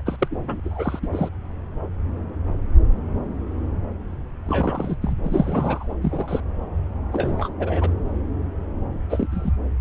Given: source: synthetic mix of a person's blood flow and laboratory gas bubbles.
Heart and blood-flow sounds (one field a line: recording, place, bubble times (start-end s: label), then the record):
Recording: Doppler ultrasound of blood flow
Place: subclavian vein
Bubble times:
0.00-0.02 s: bubbles
0.05-0.60 s: bubbles
0.65-0.99 s: bubbles
1.02-1.07 s: bubbles
1.12-1.29 s: bubbles
4.46-4.96 s: bubbles
5.01-5.12 s: bubbles
5.24-5.93 s: bubbles
6.02-6.41 s: bubbles
7.12-7.49 s: bubbles
7.59-7.90 s: bubbles
9.09-9.27 s: bubbles
9.32-9.51 s: bubbles
From the record:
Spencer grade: 3 (all of the cardiac periods contain showers or single bubble signals, but not dominating or overriding the cardiac motion signals)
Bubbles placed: anywhere in the cardiac cycle